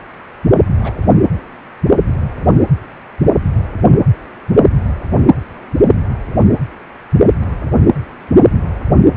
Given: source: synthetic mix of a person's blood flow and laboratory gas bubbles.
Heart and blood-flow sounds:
Doppler ultrasound of blood flow; precordium
0.82-0.93 s: bubbles
From the record:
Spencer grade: 1 (occasional bubble signal discernible with the cardiac motion signal, with majority of cardiac periods free of bubbles); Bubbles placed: only in the low amplitude regions of the cardiac cycle

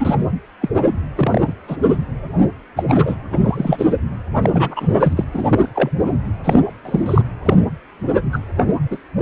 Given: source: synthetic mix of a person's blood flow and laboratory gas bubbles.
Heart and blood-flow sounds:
Doppler ultrasound of blood flow; precordium
0.00-0.15 s: bubbles
0.61-0.69 s: bubbles
0.77-0.95 s: bubbles
1.16-1.53 s: bubbles
1.68-1.78 s: bubbles
1.88-1.97 s: bubbles
2.76-3.15 s: bubbles
3.31-3.38 s: bubbles
3.42-3.96 s: bubbles
4.42-4.88 s: bubbles
4.99-5.13 s: bubbles
5.16-5.25 s: bubbles
5.32-5.69 s: bubbles
5.75-5.91 s: bubbles
6.06-6.15 s: bubbles
6.44-6.76 s: bubbles
6.85-7.21 s: bubbles
7.45-7.57 s: bubbles
7.59-7.68 s: bubbles
8.32-8.39 s: bubbles
8.57-8.63 s: bubbles
8.90-8.97 s: bubbles
9.17-9.22 s: bubbles
From the record:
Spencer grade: 3 (all of the cardiac periods contain showers or single bubble signals, but not dominating or overriding the cardiac motion signals); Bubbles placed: anywhere in the cardiac cycle

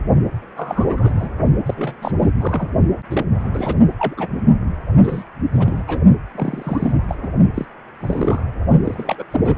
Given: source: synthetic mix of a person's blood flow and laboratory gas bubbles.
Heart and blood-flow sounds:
Doppler ultrasound of blood flow; precordium
0.56-1.30 s: bubbles
1.66-1.74 s: bubbles
1.77-1.95 s: bubbles
2.01-2.11 s: bubbles
2.20-2.32 s: bubbles
2.40-2.68 s: bubbles
3.10-3.25 s: bubbles
3.33-3.78 s: bubbles
3.99-4.14 s: bubbles
4.17-4.27 s: bubbles
5.04-5.23 s: bubbles
5.52-5.83 s: bubbles
5.87-5.98 s: bubbles
6.35-7.00 s: bubbles
7.08-7.15 s: bubbles
7.22-7.27 s: bubbles
7.54-7.66 s: bubbles
8.01-8.41 s: bubbles
8.85-9.16 s: bubbles
9.18-9.25 s: bubbles
9.31-9.58 s: bubbles
From the record:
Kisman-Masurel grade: 242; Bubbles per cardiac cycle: several, 3 to 8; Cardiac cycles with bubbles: 100%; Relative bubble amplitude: moderate (0.250 to 0.450); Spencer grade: 3 (all of the cardiac periods contain showers or single bubble signals, but not dominating or overriding the cardiac motion signals); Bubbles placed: only in the low amplitude regions of the cardiac cycle

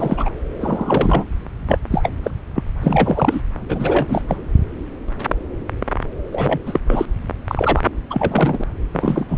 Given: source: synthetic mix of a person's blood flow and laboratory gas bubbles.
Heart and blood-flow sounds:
Doppler ultrasound of blood flow; subclavian vein
0.00-0.30 s: bubbles
0.60-1.24 s: bubbles
1.68-1.78 s: bubbles
1.90-2.12 s: bubbles
2.22-2.30 s: bubbles
2.55-2.63 s: bubbles
2.82-3.42 s: bubbles
3.68-4.22 s: bubbles
4.28-4.37 s: bubbles
6.33-6.59 s: bubbles
6.66-6.79 s: bubbles
6.89-7.05 s: bubbles
7.47-7.82 s: bubbles
8.10-8.64 s: bubbles
8.93-9.25 s: bubbles
9.29-9.38 s: bubbles
From the record:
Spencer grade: 3 (all of the cardiac periods contain showers or single bubble signals, but not dominating or overriding the cardiac motion signals); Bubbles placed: anywhere in the cardiac cycle

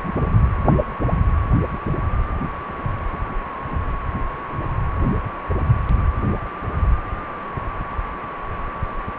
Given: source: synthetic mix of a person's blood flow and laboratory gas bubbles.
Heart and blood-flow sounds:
Doppler ultrasound of blood flow; precordium
no bubbles
From the record:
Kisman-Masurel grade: 000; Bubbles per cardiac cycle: 0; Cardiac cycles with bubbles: 0%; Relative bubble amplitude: no bubbles discernible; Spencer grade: 0 (complete lack of bubble signals)

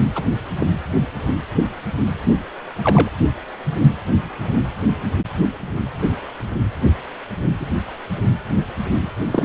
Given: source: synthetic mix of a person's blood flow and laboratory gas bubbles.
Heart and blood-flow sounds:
Doppler ultrasound of blood flow; precordium
0.14-0.23 s: bubbles
0.57-0.66 s: bubbles
2.83-3.10 s: bubbles
7.59-7.66 s: bubbles
9.31-9.45 s: bubbles
From the record:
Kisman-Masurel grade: 122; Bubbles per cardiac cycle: 1 to 2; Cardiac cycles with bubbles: 10 to 50%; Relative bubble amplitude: moderate (0.250 to 0.450); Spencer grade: 2 (many but less than half of the cardiac periods contain bubble signals, singularly or in groups); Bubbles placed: anywhere in the cardiac cycle

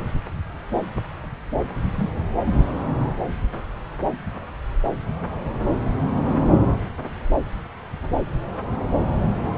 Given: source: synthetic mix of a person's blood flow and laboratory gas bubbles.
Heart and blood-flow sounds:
Doppler ultrasound of blood flow; subclavian vein
1.94-2.09 s: bubbles
From the record:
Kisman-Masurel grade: 111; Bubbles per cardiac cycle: 1 to 2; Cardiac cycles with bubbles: 1 to 10%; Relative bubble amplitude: barely perceptible (0.100 to 0.250); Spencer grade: 1 (occasional bubble signal discernible with the cardiac motion signal, with majority of cardiac periods free of bubbles); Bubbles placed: anywhere in the cardiac cycle

